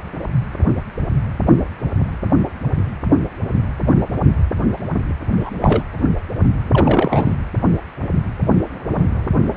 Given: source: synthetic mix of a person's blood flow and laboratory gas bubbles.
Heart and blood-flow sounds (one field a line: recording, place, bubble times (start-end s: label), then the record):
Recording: Doppler ultrasound of blood flow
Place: precordium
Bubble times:
5.40-5.52 s: bubbles
5.59-5.83 s: bubbles
6.72-7.35 s: bubbles
From the record:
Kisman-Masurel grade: 212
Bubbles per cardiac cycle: several, 3 to 8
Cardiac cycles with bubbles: 1 to 10%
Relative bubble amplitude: moderate (0.250 to 0.450)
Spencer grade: 1 (occasional bubble signal discernible with the cardiac motion signal, with majority of cardiac periods free of bubbles)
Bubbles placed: anywhere in the cardiac cycle